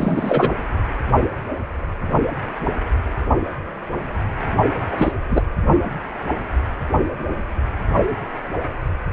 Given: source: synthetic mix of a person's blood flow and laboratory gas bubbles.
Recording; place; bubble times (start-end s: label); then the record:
Doppler ultrasound of blood flow; precordium
0.00-0.51 s: bubbles
4.92-5.12 s: bubbles
5.29-5.42 s: bubbles
From the record:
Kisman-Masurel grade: 223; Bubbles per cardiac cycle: several, 3 to 8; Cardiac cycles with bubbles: 10 to 50%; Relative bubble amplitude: loud (0.450 to 0.775); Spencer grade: 2 (many but less than half of the cardiac periods contain bubble signals, singularly or in groups); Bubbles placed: anywhere in the cardiac cycle